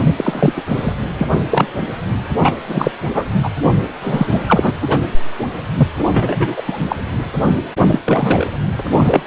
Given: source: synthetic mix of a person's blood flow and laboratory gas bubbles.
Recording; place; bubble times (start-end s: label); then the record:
Doppler ultrasound of blood flow; precordium
0.04-0.53 s: bubbles
0.56-0.62 s: bubbles
0.67-0.93 s: bubbles
1.18-1.43 s: bubbles
1.51-1.67 s: bubbles
2.42-2.59 s: bubbles
2.67-2.92 s: bubbles
3.13-3.25 s: bubbles
3.42-3.49 s: bubbles
4.01-4.43 s: bubbles
4.47-4.72 s: bubbles
4.81-4.99 s: bubbles
5.77-5.88 s: bubbles
5.97-6.62 s: bubbles
6.67-6.85 s: bubbles
6.88-6.96 s: bubbles
7.46-7.64 s: bubbles
7.86-7.99 s: bubbles
8.05-8.46 s: bubbles
8.79-8.83 s: bubbles
8.91-9.23 s: bubbles
From the record:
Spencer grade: 3 (all of the cardiac periods contain showers or single bubble signals, but not dominating or overriding the cardiac motion signals); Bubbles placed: anywhere in the cardiac cycle